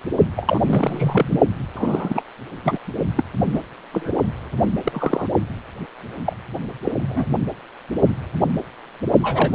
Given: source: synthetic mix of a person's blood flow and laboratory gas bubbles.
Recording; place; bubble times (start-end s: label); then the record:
Doppler ultrasound of blood flow; precordium
0.36-0.60 s: bubbles
0.66-1.40 s: bubbles
1.75-2.22 s: bubbles
2.65-2.78 s: bubbles
3.17-3.23 s: bubbles
3.50-3.60 s: bubbles
3.92-4.14 s: bubbles
4.58-4.62 s: bubbles
4.83-5.27 s: bubbles
6.26-6.37 s: bubbles
6.82-6.92 s: bubbles
7.03-7.27 s: bubbles
9.21-9.55 s: bubbles
From the record:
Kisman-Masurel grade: 232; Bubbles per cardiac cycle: several, 3 to 8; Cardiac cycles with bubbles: 50 to 99%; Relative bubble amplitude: moderate (0.250 to 0.450); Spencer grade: 3 (all of the cardiac periods contain showers or single bubble signals, but not dominating or overriding the cardiac motion signals); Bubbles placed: only in the low amplitude regions of the cardiac cycle